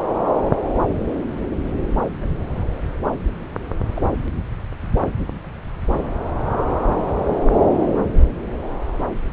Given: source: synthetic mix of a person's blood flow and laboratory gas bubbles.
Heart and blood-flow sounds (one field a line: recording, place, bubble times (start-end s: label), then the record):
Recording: Doppler ultrasound of blood flow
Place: subclavian vein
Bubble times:
2.12-2.44 s: bubbles
3.94-4.02 s: bubbles
6.90-7.38 s: bubbles
From the record:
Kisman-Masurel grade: 121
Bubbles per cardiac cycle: 1 to 2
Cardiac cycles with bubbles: 10 to 50%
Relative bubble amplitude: barely perceptible (0.100 to 0.250)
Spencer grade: 2 (many but less than half of the cardiac periods contain bubble signals, singularly or in groups)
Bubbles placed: anywhere in the cardiac cycle